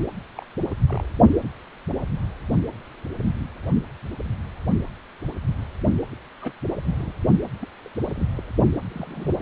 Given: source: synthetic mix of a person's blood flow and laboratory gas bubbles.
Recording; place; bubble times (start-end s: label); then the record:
Doppler ultrasound of blood flow; precordium
0.37-0.43 s: bubbles
0.88-1.08 s: bubbles
6.42-6.53 s: bubbles
6.83-7.13 s: bubbles
7.61-7.66 s: bubbles
7.84-7.89 s: bubbles
8.07-8.25 s: bubbles
8.37-8.43 s: bubbles
8.89-9.31 s: bubbles
9.38-9.41 s: bubbles
From the record:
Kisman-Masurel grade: 221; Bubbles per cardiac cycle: several, 3 to 8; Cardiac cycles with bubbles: 10 to 50%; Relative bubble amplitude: barely perceptible (0.100 to 0.250); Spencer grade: 2 (many but less than half of the cardiac periods contain bubble signals, singularly or in groups); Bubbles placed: only in the low amplitude regions of the cardiac cycle